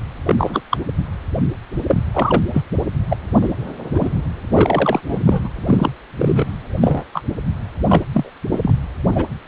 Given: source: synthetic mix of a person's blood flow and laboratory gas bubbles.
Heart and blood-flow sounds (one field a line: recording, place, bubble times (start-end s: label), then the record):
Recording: Doppler ultrasound of blood flow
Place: precordium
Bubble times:
0.26-0.35 s: bubbles
0.38-0.60 s: bubbles
0.70-0.78 s: bubbles
1.87-2.03 s: bubbles
2.14-2.40 s: bubbles
2.53-2.62 s: bubbles
3.09-3.17 s: bubbles
3.41-3.49 s: bubbles
3.94-4.11 s: bubbles
4.53-5.49 s: bubbles
5.65-5.91 s: bubbles
6.19-6.50 s: bubbles
6.81-7.04 s: bubbles
7.13-7.21 s: bubbles
7.88-8.04 s: bubbles
8.13-8.29 s: bubbles
8.52-8.73 s: bubbles
9.11-9.23 s: bubbles
From the record:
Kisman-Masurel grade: 243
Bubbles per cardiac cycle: several, 3 to 8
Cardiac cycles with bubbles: 100%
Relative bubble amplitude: loud (0.450 to 0.775)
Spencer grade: 3 (all of the cardiac periods contain showers or single bubble signals, but not dominating or overriding the cardiac motion signals)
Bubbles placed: anywhere in the cardiac cycle